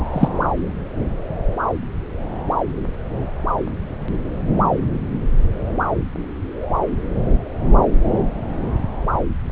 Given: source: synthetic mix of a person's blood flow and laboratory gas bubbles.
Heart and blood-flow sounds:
Doppler ultrasound of blood flow; subclavian vein
0.12-0.28 s: bubbles
From the record:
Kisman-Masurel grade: 113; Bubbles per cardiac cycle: 1 to 2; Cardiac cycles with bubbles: 1 to 10%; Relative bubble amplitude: loud (0.450 to 0.775); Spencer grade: 1 (occasional bubble signal discernible with the cardiac motion signal, with majority of cardiac periods free of bubbles); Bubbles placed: anywhere in the cardiac cycle

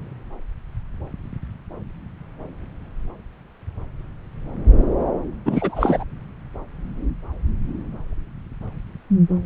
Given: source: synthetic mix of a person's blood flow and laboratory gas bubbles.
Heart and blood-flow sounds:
Doppler ultrasound of blood flow; subclavian vein
5.46-6.04 s: bubbles
From the record:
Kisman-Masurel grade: 213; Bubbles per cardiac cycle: several, 3 to 8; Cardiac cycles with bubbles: 1 to 10%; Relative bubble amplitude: loud (0.450 to 0.775); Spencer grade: 1 (occasional bubble signal discernible with the cardiac motion signal, with majority of cardiac periods free of bubbles); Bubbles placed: anywhere in the cardiac cycle

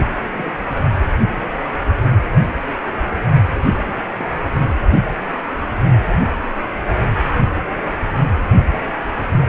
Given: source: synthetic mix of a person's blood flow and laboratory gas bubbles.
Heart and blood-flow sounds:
Doppler ultrasound of blood flow; precordium
0.11-0.16 s: bubbles
0.23-0.52 s: bubbles
0.75-0.82 s: bubbles
0.85-1.34 s: bubbles
3.47-3.94 s: bubbles
4.17-4.28 s: bubbles
8.71-8.92 s: bubbles
From the record:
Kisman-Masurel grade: 221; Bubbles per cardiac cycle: several, 3 to 8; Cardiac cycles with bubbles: 10 to 50%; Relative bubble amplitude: barely perceptible (0.100 to 0.250); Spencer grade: 2 (many but less than half of the cardiac periods contain bubble signals, singularly or in groups); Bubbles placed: only in the low amplitude regions of the cardiac cycle

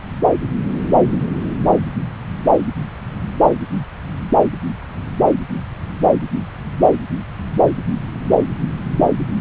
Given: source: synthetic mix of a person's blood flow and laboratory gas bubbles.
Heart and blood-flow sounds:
Doppler ultrasound of blood flow; subclavian vein
no bubbles
From the record:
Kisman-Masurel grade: 000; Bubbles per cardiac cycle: 0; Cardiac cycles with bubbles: 0%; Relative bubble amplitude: no bubbles discernible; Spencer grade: 0 (complete lack of bubble signals)

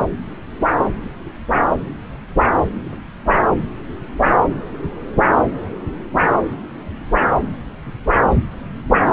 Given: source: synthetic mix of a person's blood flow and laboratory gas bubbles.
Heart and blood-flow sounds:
Doppler ultrasound of blood flow; subclavian vein
no bubbles
From the record:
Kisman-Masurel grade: 000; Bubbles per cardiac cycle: 0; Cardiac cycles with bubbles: 0%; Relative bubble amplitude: no bubbles discernible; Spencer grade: 0 (complete lack of bubble signals)

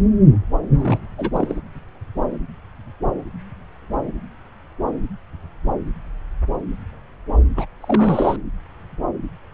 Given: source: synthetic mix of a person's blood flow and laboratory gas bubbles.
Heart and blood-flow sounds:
Doppler ultrasound of blood flow; subclavian vein
0.74-1.00 s: bubbles
1.18-1.60 s: bubbles
7.57-7.66 s: bubbles
7.81-8.36 s: bubbles
From the record:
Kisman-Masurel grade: 222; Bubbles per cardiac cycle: several, 3 to 8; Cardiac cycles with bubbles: 10 to 50%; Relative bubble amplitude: moderate (0.250 to 0.450); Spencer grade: 2 (many but less than half of the cardiac periods contain bubble signals, singularly or in groups); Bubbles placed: anywhere in the cardiac cycle

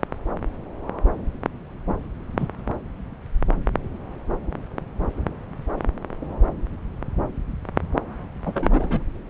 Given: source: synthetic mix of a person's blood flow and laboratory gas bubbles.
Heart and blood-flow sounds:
Doppler ultrasound of blood flow; subclavian vein
2.38-2.47 s: bubbles
8.46-9.04 s: bubbles
From the record:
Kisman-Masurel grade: 122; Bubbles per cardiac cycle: 1 to 2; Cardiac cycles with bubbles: 10 to 50%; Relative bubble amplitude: moderate (0.250 to 0.450); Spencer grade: 2 (many but less than half of the cardiac periods contain bubble signals, singularly or in groups); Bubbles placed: anywhere in the cardiac cycle

